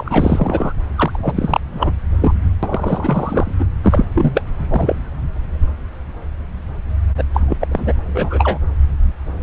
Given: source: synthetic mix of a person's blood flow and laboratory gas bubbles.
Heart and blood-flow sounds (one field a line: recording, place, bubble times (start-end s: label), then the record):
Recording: Doppler ultrasound of blood flow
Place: subclavian vein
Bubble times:
0.00-0.73 s: bubbles
0.95-1.19 s: bubbles
1.22-1.60 s: bubbles
1.71-1.92 s: bubbles
2.21-2.34 s: bubbles
2.62-3.56 s: bubbles
3.59-3.66 s: bubbles
3.83-4.05 s: bubbles
4.14-4.42 s: bubbles
4.69-4.96 s: bubbles
7.17-7.23 s: bubbles
7.33-7.41 s: bubbles
7.47-7.57 s: bubbles
7.60-7.67 s: bubbles
7.71-7.93 s: bubbles
8.14-8.59 s: bubbles
From the record:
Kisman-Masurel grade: 333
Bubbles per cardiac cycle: rolling drumbeat, 9 or more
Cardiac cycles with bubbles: 50 to 99%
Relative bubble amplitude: loud (0.450 to 0.775)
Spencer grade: 3 (all of the cardiac periods contain showers or single bubble signals, but not dominating or overriding the cardiac motion signals)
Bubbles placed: anywhere in the cardiac cycle